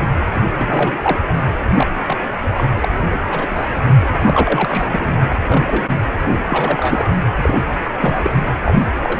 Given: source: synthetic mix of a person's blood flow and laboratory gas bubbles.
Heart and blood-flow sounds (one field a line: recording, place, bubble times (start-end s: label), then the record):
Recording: Doppler ultrasound of blood flow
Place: precordium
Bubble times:
0.00-0.03 s: bubbles
0.34-0.44 s: bubbles
0.52-1.19 s: bubbles
1.77-1.87 s: bubbles
2.06-2.17 s: bubbles
2.56-2.72 s: bubbles
2.81-2.89 s: bubbles
3.10-3.16 s: bubbles
3.30-3.48 s: bubbles
3.51-3.70 s: bubbles
4.12-5.21 s: bubbles
5.30-5.36 s: bubbles
5.44-5.99 s: bubbles
6.26-6.37 s: bubbles
6.48-7.10 s: bubbles
7.42-7.61 s: bubbles
8.00-8.40 s: bubbles
8.64-8.83 s: bubbles
9.02-9.20 s: bubbles
From the record:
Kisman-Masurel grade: 242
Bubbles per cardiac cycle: several, 3 to 8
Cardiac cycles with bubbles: 100%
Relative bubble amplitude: moderate (0.250 to 0.450)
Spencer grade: 3 (all of the cardiac periods contain showers or single bubble signals, but not dominating or overriding the cardiac motion signals)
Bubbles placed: anywhere in the cardiac cycle